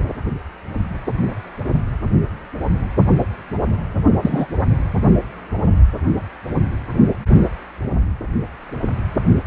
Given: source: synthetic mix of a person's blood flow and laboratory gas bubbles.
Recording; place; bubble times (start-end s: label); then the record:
Doppler ultrasound of blood flow; precordium
4.21-4.46 s: bubbles
From the record:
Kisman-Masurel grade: 123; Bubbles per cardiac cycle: 1 to 2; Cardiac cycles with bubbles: 10 to 50%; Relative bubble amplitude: loud (0.450 to 0.775); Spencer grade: 2 (many but less than half of the cardiac periods contain bubble signals, singularly or in groups); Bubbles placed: anywhere in the cardiac cycle